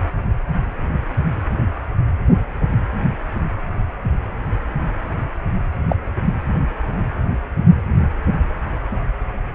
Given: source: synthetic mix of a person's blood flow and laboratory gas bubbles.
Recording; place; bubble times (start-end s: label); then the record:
Doppler ultrasound of blood flow; precordium
5.89-5.96 s: bubbles
From the record:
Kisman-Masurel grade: 113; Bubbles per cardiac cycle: 1 to 2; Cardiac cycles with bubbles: 1 to 10%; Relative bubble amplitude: loud (0.450 to 0.775); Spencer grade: 1 (occasional bubble signal discernible with the cardiac motion signal, with majority of cardiac periods free of bubbles); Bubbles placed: anywhere in the cardiac cycle